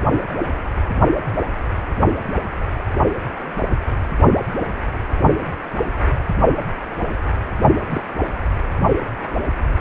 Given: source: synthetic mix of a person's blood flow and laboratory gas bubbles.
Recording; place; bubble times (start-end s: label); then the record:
Doppler ultrasound of blood flow; precordium
7.90-8.01 s: bubbles
8.18-8.25 s: bubbles
From the record:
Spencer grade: 1 (occasional bubble signal discernible with the cardiac motion signal, with majority of cardiac periods free of bubbles); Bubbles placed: only in the low amplitude regions of the cardiac cycle